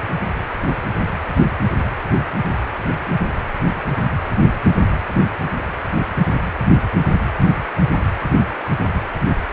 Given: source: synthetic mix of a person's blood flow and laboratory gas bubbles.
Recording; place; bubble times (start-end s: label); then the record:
Doppler ultrasound of blood flow; precordium
no bubbles
From the record:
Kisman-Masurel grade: 000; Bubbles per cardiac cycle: 0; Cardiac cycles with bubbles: 0%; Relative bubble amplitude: no bubbles discernible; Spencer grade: 0 (complete lack of bubble signals)